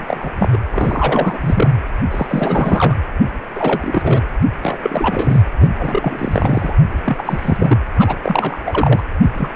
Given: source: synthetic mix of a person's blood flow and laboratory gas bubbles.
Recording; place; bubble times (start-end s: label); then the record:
Doppler ultrasound of blood flow; precordium
0.00-0.31 s: bubbles
0.39-0.59 s: bubbles
0.70-1.72 s: bubbles
2.10-2.97 s: bubbles
3.55-4.21 s: bubbles
4.62-5.42 s: bubbles
5.60-5.68 s: bubbles
5.77-6.72 s: bubbles
7.04-7.76 s: bubbles
7.99-8.17 s: bubbles
8.22-8.60 s: bubbles
8.66-9.05 s: bubbles
9.34-9.49 s: bubbles
From the record:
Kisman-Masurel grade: 343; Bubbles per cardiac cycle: rolling drumbeat, 9 or more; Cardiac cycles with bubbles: 100%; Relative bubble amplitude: loud (0.450 to 0.775); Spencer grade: 3 (all of the cardiac periods contain showers or single bubble signals, but not dominating or overriding the cardiac motion signals); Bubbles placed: anywhere in the cardiac cycle